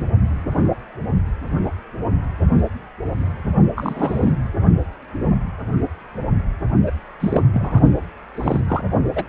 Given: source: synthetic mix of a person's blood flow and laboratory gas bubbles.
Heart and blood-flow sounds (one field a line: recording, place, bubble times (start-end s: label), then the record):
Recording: Doppler ultrasound of blood flow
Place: precordium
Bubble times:
0.00-0.11 s: bubbles
3.76-4.33 s: bubbles
6.86-6.92 s: bubbles
7.20-7.44 s: bubbles
7.53-7.80 s: bubbles
8.35-8.60 s: bubbles
8.68-8.83 s: bubbles
9.15-9.23 s: bubbles
From the record:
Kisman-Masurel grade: 232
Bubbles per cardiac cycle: several, 3 to 8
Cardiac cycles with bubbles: 50 to 99%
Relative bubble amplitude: moderate (0.250 to 0.450)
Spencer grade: 3 (all of the cardiac periods contain showers or single bubble signals, but not dominating or overriding the cardiac motion signals)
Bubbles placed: only in the low amplitude regions of the cardiac cycle